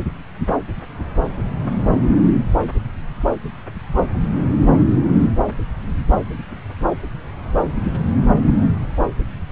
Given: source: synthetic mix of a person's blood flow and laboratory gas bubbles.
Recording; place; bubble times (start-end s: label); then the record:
Doppler ultrasound of blood flow; subclavian vein
no bubbles
From the record:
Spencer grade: 0 (complete lack of bubble signals)